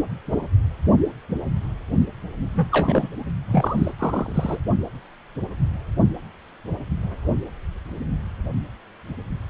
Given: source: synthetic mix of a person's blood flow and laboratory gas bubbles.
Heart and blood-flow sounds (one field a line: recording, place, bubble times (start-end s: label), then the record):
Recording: Doppler ultrasound of blood flow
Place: precordium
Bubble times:
2.55-2.68 s: bubbles
2.71-3.08 s: bubbles
3.47-3.92 s: bubbles
3.99-4.60 s: bubbles
From the record:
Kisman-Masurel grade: 222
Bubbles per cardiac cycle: several, 3 to 8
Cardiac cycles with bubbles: 10 to 50%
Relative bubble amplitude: moderate (0.250 to 0.450)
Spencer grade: 2 (many but less than half of the cardiac periods contain bubble signals, singularly or in groups)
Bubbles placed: only in the low amplitude regions of the cardiac cycle